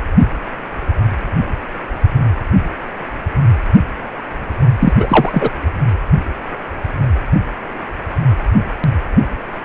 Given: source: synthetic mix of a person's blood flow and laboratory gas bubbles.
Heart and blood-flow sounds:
Doppler ultrasound of blood flow; precordium
4.79-4.93 s: bubbles
4.99-5.50 s: bubbles
From the record:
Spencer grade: 2 (many but less than half of the cardiac periods contain bubble signals, singularly or in groups); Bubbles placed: anywhere in the cardiac cycle

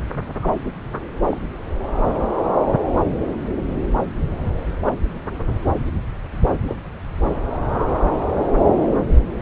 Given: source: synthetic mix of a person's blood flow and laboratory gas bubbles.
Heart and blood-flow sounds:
Doppler ultrasound of blood flow; subclavian vein
0.40-0.55 s: bubbles
1.29-1.40 s: bubbles
4.81-4.92 s: bubbles
6.66-6.75 s: bubbles
From the record:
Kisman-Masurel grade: 121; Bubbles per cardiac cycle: 1 to 2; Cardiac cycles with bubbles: 10 to 50%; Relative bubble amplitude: barely perceptible (0.100 to 0.250); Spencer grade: 2 (many but less than half of the cardiac periods contain bubble signals, singularly or in groups); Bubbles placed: anywhere in the cardiac cycle

